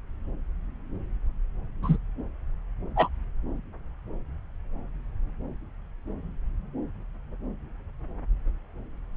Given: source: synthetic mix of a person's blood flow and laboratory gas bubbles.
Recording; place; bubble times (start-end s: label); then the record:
Doppler ultrasound of blood flow; subclavian vein
1.82-1.97 s: bubbles
2.96-3.08 s: bubbles
From the record:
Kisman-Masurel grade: 112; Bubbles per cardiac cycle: 1 to 2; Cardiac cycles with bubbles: 1 to 10%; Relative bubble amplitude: moderate (0.250 to 0.450); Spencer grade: 1 (occasional bubble signal discernible with the cardiac motion signal, with majority of cardiac periods free of bubbles); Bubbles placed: anywhere in the cardiac cycle